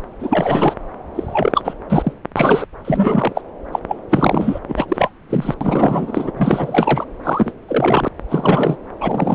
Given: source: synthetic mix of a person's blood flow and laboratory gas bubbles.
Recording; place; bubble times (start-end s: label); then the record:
Doppler ultrasound of blood flow; subclavian vein
0.19-0.74 s: bubbles
1.15-1.52 s: bubbles
1.54-1.73 s: bubbles
1.90-2.12 s: bubbles
2.36-2.67 s: bubbles
2.84-3.42 s: bubbles
3.73-3.79 s: bubbles
3.89-3.96 s: bubbles
4.10-4.60 s: bubbles
4.69-5.10 s: bubbles
5.29-5.54 s: bubbles
5.61-6.31 s: bubbles
6.37-7.04 s: bubbles
7.24-7.52 s: bubbles
7.68-8.09 s: bubbles
8.29-8.77 s: bubbles
9.00-9.35 s: bubbles
From the record:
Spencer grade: 3 (all of the cardiac periods contain showers or single bubble signals, but not dominating or overriding the cardiac motion signals); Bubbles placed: anywhere in the cardiac cycle